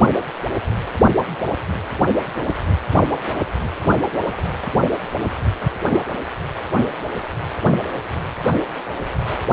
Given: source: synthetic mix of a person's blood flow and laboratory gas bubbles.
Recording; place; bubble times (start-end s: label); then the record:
Doppler ultrasound of blood flow; precordium
no bubbles
From the record:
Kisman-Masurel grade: 000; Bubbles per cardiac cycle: 0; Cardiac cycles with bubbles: 0%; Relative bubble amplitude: no bubbles discernible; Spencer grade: 0 (complete lack of bubble signals)